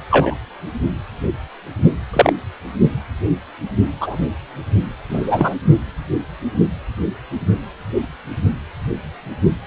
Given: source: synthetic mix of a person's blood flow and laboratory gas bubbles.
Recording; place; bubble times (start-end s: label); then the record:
Doppler ultrasound of blood flow; precordium
0.10-0.35 s: bubbles
2.13-2.33 s: bubbles
4.00-4.17 s: bubbles
5.10-5.55 s: bubbles
From the record:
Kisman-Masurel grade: 123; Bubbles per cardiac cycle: 1 to 2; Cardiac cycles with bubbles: 10 to 50%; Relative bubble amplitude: loud (0.450 to 0.775); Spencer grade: 2 (many but less than half of the cardiac periods contain bubble signals, singularly or in groups); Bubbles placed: only in the low amplitude regions of the cardiac cycle